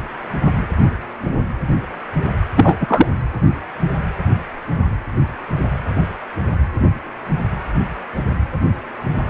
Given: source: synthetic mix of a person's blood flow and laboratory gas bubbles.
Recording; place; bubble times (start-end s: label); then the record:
Doppler ultrasound of blood flow; precordium
2.56-2.78 s: bubbles
2.81-3.06 s: bubbles
From the record:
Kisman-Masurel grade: 223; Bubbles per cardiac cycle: several, 3 to 8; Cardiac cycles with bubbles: 10 to 50%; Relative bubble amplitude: loud (0.450 to 0.775); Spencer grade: 2 (many but less than half of the cardiac periods contain bubble signals, singularly or in groups); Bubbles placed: anywhere in the cardiac cycle